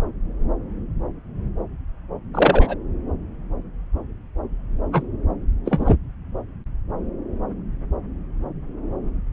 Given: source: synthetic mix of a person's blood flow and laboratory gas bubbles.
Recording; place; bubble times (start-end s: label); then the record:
Doppler ultrasound of blood flow; subclavian vein
2.33-2.75 s: bubbles
4.92-5.02 s: bubbles
5.65-5.96 s: bubbles
From the record:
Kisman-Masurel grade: 123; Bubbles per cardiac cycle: 1 to 2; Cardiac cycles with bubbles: 10 to 50%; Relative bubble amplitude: loud (0.450 to 0.775); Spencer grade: 2 (many but less than half of the cardiac periods contain bubble signals, singularly or in groups); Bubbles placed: anywhere in the cardiac cycle